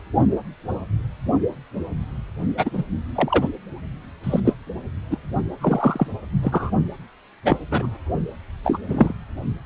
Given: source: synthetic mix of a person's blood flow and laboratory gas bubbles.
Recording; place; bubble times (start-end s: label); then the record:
Doppler ultrasound of blood flow; precordium
2.57-2.69 s: bubbles
2.73-2.83 s: bubbles
3.15-3.48 s: bubbles
4.24-4.40 s: bubbles
4.45-4.54 s: bubbles
5.11-5.17 s: bubbles
5.61-6.07 s: bubbles
6.42-6.70 s: bubbles
7.45-7.57 s: bubbles
7.71-7.89 s: bubbles
8.63-8.79 s: bubbles
8.88-9.13 s: bubbles
From the record:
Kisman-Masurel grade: 232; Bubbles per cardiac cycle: several, 3 to 8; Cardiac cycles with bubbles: 50 to 99%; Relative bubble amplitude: moderate (0.250 to 0.450); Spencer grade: 3 (all of the cardiac periods contain showers or single bubble signals, but not dominating or overriding the cardiac motion signals); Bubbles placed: only in the low amplitude regions of the cardiac cycle